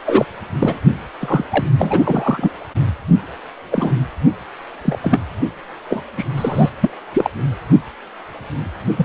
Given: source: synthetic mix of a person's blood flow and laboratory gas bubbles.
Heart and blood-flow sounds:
Doppler ultrasound of blood flow; precordium
0.06-0.25 s: bubbles
0.59-0.79 s: bubbles
1.20-1.44 s: bubbles
1.50-1.65 s: bubbles
1.77-2.52 s: bubbles
3.71-3.92 s: bubbles
4.85-4.98 s: bubbles
5.02-5.20 s: bubbles
5.88-6.04 s: bubbles
6.17-6.25 s: bubbles
6.36-6.70 s: bubbles
6.80-6.90 s: bubbles
7.13-7.30 s: bubbles
8.97-9.05 s: bubbles
From the record:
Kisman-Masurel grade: 233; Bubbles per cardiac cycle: several, 3 to 8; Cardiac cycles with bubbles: 50 to 99%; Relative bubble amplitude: loud (0.450 to 0.775); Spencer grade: 3 (all of the cardiac periods contain showers or single bubble signals, but not dominating or overriding the cardiac motion signals); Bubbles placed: only in the low amplitude regions of the cardiac cycle

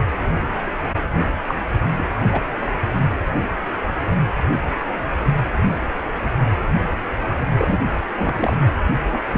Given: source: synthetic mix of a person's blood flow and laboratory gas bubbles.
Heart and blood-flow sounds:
Doppler ultrasound of blood flow; precordium
1.47-1.55 s: bubbles
1.97-2.02 s: bubbles
2.33-2.42 s: bubbles
7.58-7.79 s: bubbles
8.15-8.57 s: bubbles
9.12-9.18 s: bubbles
9.32-9.38 s: bubbles
From the record:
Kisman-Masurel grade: 222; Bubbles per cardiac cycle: several, 3 to 8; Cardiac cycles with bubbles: 10 to 50%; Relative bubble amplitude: moderate (0.250 to 0.450); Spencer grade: 2 (many but less than half of the cardiac periods contain bubble signals, singularly or in groups); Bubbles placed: anywhere in the cardiac cycle

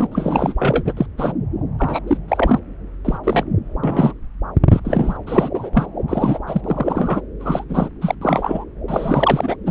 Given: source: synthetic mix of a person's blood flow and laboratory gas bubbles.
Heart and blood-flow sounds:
Doppler ultrasound of blood flow; subclavian vein
0.00-0.07 s: bubbles
0.11-0.54 s: bubbles
0.58-0.94 s: bubbles
0.97-1.06 s: bubbles
1.18-1.32 s: bubbles
1.78-2.01 s: bubbles
2.07-2.17 s: bubbles
2.28-2.59 s: bubbles
3.04-3.18 s: bubbles
3.24-3.44 s: bubbles
3.83-4.13 s: bubbles
4.70-4.80 s: bubbles
4.84-5.17 s: bubbles
5.27-5.50 s: bubbles
5.55-5.70 s: bubbles
5.73-5.87 s: bubbles
6.08-6.38 s: bubbles
6.46-6.61 s: bubbles
6.64-7.21 s: bubbles
7.40-7.65 s: bubbles
7.69-7.88 s: bubbles
8.01-8.15 s: bubbles
8.21-8.64 s: bubbles
8.88-9.56 s: bubbles
9.66-9.71 s: bubbles
From the record:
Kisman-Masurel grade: 243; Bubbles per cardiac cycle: several, 3 to 8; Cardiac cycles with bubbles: 100%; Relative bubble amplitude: loud (0.450 to 0.775); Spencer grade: 3 (all of the cardiac periods contain showers or single bubble signals, but not dominating or overriding the cardiac motion signals); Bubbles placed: anywhere in the cardiac cycle

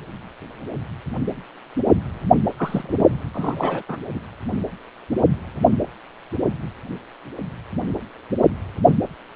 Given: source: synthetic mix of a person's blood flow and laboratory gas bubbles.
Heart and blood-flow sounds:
Doppler ultrasound of blood flow; precordium
2.58-3.19 s: bubbles
3.34-3.83 s: bubbles
3.88-3.97 s: bubbles
4.15-4.20 s: bubbles
From the record:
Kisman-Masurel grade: 222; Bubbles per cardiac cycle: several, 3 to 8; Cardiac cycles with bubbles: 10 to 50%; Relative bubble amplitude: moderate (0.250 to 0.450); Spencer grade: 2 (many but less than half of the cardiac periods contain bubble signals, singularly or in groups); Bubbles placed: anywhere in the cardiac cycle

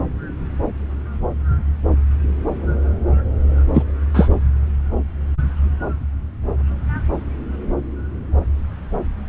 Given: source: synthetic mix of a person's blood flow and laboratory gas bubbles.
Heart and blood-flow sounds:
Doppler ultrasound of blood flow; subclavian vein
3.74-3.83 s: bubbles
4.13-4.29 s: bubbles
From the record:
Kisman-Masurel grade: 123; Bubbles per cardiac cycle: 1 to 2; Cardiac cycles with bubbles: 10 to 50%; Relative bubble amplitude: loud (0.450 to 0.775); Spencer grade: 2 (many but less than half of the cardiac periods contain bubble signals, singularly or in groups); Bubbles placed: anywhere in the cardiac cycle

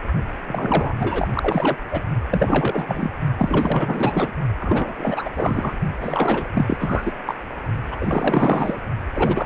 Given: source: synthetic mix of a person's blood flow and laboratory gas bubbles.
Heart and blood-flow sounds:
Doppler ultrasound of blood flow; precordium
0.47-0.94 s: bubbles
0.99-1.28 s: bubbles
1.33-1.78 s: bubbles
1.91-2.02 s: bubbles
2.30-3.10 s: bubbles
3.38-4.33 s: bubbles
4.60-4.95 s: bubbles
4.98-5.29 s: bubbles
5.35-5.77 s: bubbles
6.01-6.51 s: bubbles
6.54-7.13 s: bubbles
7.26-7.36 s: bubbles
7.91-7.96 s: bubbles
8.00-8.78 s: bubbles
9.14-9.46 s: bubbles
From the record:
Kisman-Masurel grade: 444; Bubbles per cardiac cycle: continuous sound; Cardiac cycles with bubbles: 100%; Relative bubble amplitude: maximal (0.775 to 0.999); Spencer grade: 4 (maximum detectable bubble signal sounding continuously throughout systole and diastole of every cardiac period, and overriding the amplitude of the normal cardiac signals); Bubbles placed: only in the low amplitude regions of the cardiac cycle

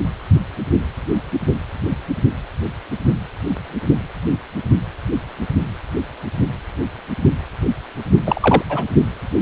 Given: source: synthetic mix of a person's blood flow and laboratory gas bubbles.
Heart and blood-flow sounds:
Doppler ultrasound of blood flow; precordium
8.25-8.63 s: bubbles
8.69-8.84 s: bubbles
From the record:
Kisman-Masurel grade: 222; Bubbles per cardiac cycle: several, 3 to 8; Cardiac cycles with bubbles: 10 to 50%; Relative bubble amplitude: moderate (0.250 to 0.450); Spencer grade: 2 (many but less than half of the cardiac periods contain bubble signals, singularly or in groups); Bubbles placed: only in the low amplitude regions of the cardiac cycle

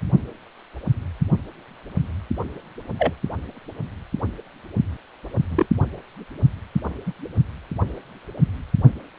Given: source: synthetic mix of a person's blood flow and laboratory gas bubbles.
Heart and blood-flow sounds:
Doppler ultrasound of blood flow; precordium
2.99-3.14 s: bubbles
5.49-5.66 s: bubbles
7.06-7.12 s: bubbles
From the record:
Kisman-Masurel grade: 122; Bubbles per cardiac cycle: 1 to 2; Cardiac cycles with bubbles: 10 to 50%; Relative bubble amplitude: moderate (0.250 to 0.450); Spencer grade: 2 (many but less than half of the cardiac periods contain bubble signals, singularly or in groups); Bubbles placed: only in the low amplitude regions of the cardiac cycle

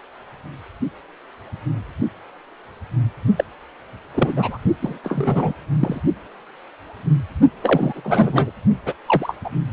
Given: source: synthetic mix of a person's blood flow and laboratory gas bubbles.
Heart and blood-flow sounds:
Doppler ultrasound of blood flow; precordium
3.36-3.44 s: bubbles
4.14-4.33 s: bubbles
4.36-4.58 s: bubbles
4.81-4.98 s: bubbles
5.03-5.53 s: bubbles
5.79-6.01 s: bubbles
7.62-8.51 s: bubbles
8.86-8.93 s: bubbles
9.06-9.36 s: bubbles
9.45-9.49 s: bubbles
From the record:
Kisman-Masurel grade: 232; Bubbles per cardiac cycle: several, 3 to 8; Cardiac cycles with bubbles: 50 to 99%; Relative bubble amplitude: moderate (0.250 to 0.450); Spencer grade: 3 (all of the cardiac periods contain showers or single bubble signals, but not dominating or overriding the cardiac motion signals); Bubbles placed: only in the low amplitude regions of the cardiac cycle

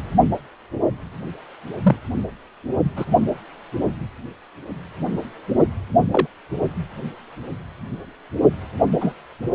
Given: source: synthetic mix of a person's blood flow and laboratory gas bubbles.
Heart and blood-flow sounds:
Doppler ultrasound of blood flow; precordium
1.82-1.96 s: bubbles
2.96-3.06 s: bubbles
6.12-6.27 s: bubbles
9.00-9.13 s: bubbles
From the record:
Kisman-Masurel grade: 123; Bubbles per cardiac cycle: 1 to 2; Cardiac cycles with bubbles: 10 to 50%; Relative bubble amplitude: loud (0.450 to 0.775); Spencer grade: 2 (many but less than half of the cardiac periods contain bubble signals, singularly or in groups); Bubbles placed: only in the low amplitude regions of the cardiac cycle

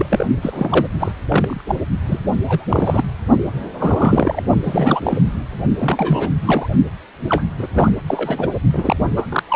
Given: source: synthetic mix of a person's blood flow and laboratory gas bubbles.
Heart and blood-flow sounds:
Doppler ultrasound of blood flow; precordium
0.00-0.06 s: bubbles
0.10-0.24 s: bubbles
0.41-0.85 s: bubbles
0.99-1.11 s: bubbles
1.28-1.61 s: bubbles
1.67-1.75 s: bubbles
2.06-2.19 s: bubbles
2.47-2.66 s: bubbles
2.69-3.04 s: bubbles
3.79-4.41 s: bubbles
4.63-5.21 s: bubbles
5.79-6.32 s: bubbles
6.46-6.67 s: bubbles
7.28-7.44 s: bubbles
7.59-7.67 s: bubbles
7.73-7.95 s: bubbles
8.06-8.48 s: bubbles
8.72-8.96 s: bubbles
9.16-9.26 s: bubbles
9.29-9.43 s: bubbles
9.48-9.55 s: bubbles
From the record:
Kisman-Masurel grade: 342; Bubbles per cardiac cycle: rolling drumbeat, 9 or more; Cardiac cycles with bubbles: 100%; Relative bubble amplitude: moderate (0.250 to 0.450); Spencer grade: 3 (all of the cardiac periods contain showers or single bubble signals, but not dominating or overriding the cardiac motion signals); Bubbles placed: only in the low amplitude regions of the cardiac cycle

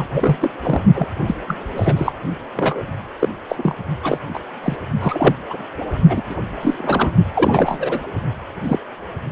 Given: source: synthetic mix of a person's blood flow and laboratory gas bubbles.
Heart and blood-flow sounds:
Doppler ultrasound of blood flow; precordium
0.00-0.36 s: bubbles
0.40-0.50 s: bubbles
0.62-0.82 s: bubbles
0.94-1.07 s: bubbles
1.26-1.36 s: bubbles
1.47-1.56 s: bubbles
1.76-2.12 s: bubbles
2.56-2.82 s: bubbles
3.19-3.29 s: bubbles
3.48-3.75 s: bubbles
4.03-4.18 s: bubbles
4.33-4.39 s: bubbles
4.62-4.76 s: bubbles
5.00-5.35 s: bubbles
5.50-5.57 s: bubbles
5.80-5.85 s: bubbles
6.08-6.22 s: bubbles
6.29-6.35 s: bubbles
6.62-6.74 s: bubbles
6.78-7.11 s: bubbles
7.33-8.00 s: bubbles
8.63-8.79 s: bubbles
From the record:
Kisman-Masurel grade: 233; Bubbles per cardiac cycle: several, 3 to 8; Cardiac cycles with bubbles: 50 to 99%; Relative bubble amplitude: loud (0.450 to 0.775); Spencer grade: 3 (all of the cardiac periods contain showers or single bubble signals, but not dominating or overriding the cardiac motion signals); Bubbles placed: only in the low amplitude regions of the cardiac cycle

